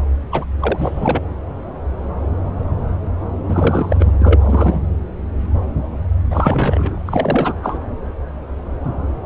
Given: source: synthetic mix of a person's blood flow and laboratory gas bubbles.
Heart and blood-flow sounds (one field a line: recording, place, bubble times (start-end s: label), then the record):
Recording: Doppler ultrasound of blood flow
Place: subclavian vein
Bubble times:
0.32-0.45 s: bubbles
0.59-1.21 s: bubbles
3.48-4.17 s: bubbles
4.20-4.83 s: bubbles
6.30-6.99 s: bubbles
7.05-7.54 s: bubbles
7.62-7.78 s: bubbles
From the record:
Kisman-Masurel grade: 333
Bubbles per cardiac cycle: rolling drumbeat, 9 or more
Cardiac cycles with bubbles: 50 to 99%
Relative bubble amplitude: loud (0.450 to 0.775)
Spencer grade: 3 (all of the cardiac periods contain showers or single bubble signals, but not dominating or overriding the cardiac motion signals)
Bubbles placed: anywhere in the cardiac cycle